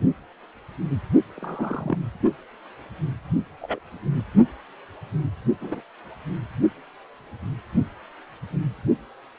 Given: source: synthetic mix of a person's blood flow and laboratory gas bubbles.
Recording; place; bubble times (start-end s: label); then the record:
Doppler ultrasound of blood flow; precordium
1.36-1.98 s: bubbles
3.61-3.79 s: bubbles
5.61-5.81 s: bubbles
From the record:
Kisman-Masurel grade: 121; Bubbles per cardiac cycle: 1 to 2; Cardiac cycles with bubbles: 10 to 50%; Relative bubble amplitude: barely perceptible (0.100 to 0.250); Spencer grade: 2 (many but less than half of the cardiac periods contain bubble signals, singularly or in groups); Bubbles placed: only in the low amplitude regions of the cardiac cycle